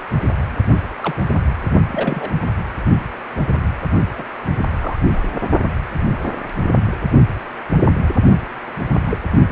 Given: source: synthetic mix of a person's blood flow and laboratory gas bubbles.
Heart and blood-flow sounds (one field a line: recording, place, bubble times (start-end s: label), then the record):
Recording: Doppler ultrasound of blood flow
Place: precordium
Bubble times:
1.01-1.15 s: bubbles
1.91-2.30 s: bubbles
4.17-4.23 s: bubbles
4.75-5.23 s: bubbles
6.24-6.32 s: bubbles
9.08-9.17 s: bubbles
From the record:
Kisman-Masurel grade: 122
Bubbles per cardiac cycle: 1 to 2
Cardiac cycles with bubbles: 10 to 50%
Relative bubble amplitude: moderate (0.250 to 0.450)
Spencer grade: 2 (many but less than half of the cardiac periods contain bubble signals, singularly or in groups)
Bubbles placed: only in the low amplitude regions of the cardiac cycle